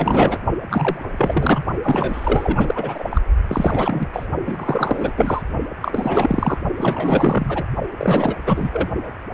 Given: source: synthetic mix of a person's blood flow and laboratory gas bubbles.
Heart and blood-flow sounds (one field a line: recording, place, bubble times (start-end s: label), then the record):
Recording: Doppler ultrasound of blood flow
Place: precordium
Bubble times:
0.00-0.39 s: bubbles
0.70-1.05 s: bubbles
1.10-1.65 s: bubbles
1.83-3.21 s: bubbles
3.47-4.08 s: bubbles
4.13-4.27 s: bubbles
4.46-5.12 s: bubbles
5.17-5.42 s: bubbles
5.82-6.58 s: bubbles
6.77-7.64 s: bubbles
7.97-8.36 s: bubbles
8.46-8.89 s: bubbles
From the record:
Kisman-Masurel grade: 444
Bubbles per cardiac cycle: continuous sound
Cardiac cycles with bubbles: 100%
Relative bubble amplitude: maximal (0.775 to 0.999)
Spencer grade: 4 (maximum detectable bubble signal sounding continuously throughout systole and diastole of every cardiac period, and overriding the amplitude of the normal cardiac signals)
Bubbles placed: only in the low amplitude regions of the cardiac cycle